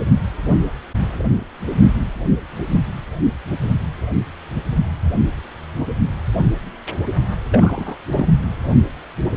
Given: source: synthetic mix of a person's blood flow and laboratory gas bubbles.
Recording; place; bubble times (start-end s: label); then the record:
Doppler ultrasound of blood flow; precordium
7.49-7.97 s: bubbles
8.11-8.26 s: bubbles
From the record:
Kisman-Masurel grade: 212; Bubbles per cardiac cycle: several, 3 to 8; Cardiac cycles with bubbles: 1 to 10%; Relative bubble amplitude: moderate (0.250 to 0.450); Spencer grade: 1 (occasional bubble signal discernible with the cardiac motion signal, with majority of cardiac periods free of bubbles); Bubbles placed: anywhere in the cardiac cycle